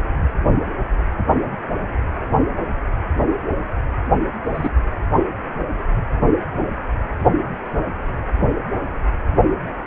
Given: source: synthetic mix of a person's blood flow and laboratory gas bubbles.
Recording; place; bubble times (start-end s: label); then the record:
Doppler ultrasound of blood flow; precordium
4.45-4.70 s: bubbles
From the record:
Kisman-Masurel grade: 112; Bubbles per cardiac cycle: 1 to 2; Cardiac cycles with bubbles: 1 to 10%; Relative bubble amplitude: moderate (0.250 to 0.450); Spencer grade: 1 (occasional bubble signal discernible with the cardiac motion signal, with majority of cardiac periods free of bubbles); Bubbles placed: only in the low amplitude regions of the cardiac cycle